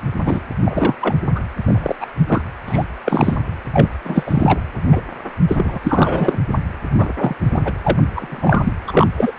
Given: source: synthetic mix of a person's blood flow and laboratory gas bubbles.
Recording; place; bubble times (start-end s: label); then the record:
Doppler ultrasound of blood flow; precordium
0.25-0.40 s: bubbles
0.65-0.95 s: bubbles
1.01-1.15 s: bubbles
1.35-1.41 s: bubbles
1.65-1.95 s: bubbles
2.00-2.06 s: bubbles
2.27-2.42 s: bubbles
2.67-2.83 s: bubbles
3.04-3.36 s: bubbles
3.73-3.90 s: bubbles
4.04-4.59 s: bubbles
4.92-5.01 s: bubbles
5.48-5.79 s: bubbles
5.82-6.38 s: bubbles
6.98-7.12 s: bubbles
7.17-7.34 s: bubbles
7.54-7.59 s: bubbles
7.64-7.72 s: bubbles
7.83-8.02 s: bubbles
8.15-8.72 s: bubbles
8.87-9.07 s: bubbles
9.16-9.31 s: bubbles
From the record:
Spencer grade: 3 (all of the cardiac periods contain showers or single bubble signals, but not dominating or overriding the cardiac motion signals); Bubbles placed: anywhere in the cardiac cycle